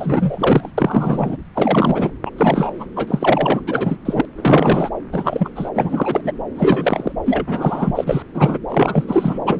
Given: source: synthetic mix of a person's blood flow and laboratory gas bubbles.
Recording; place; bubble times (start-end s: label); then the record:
Doppler ultrasound of blood flow; subclavian vein
0.00-0.70 s: bubbles
0.78-1.36 s: bubbles
1.55-2.12 s: bubbles
2.25-2.30 s: bubbles
2.37-2.86 s: bubbles
2.96-3.60 s: bubbles
3.67-3.98 s: bubbles
4.05-4.26 s: bubbles
4.37-4.90 s: bubbles
5.12-5.49 s: bubbles
5.56-5.70 s: bubbles
5.75-6.32 s: bubbles
6.56-7.12 s: bubbles
7.26-8.22 s: bubbles
8.34-8.59 s: bubbles
8.69-9.39 s: bubbles
9.46-9.60 s: bubbles
From the record:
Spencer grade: 3 (all of the cardiac periods contain showers or single bubble signals, but not dominating or overriding the cardiac motion signals); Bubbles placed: anywhere in the cardiac cycle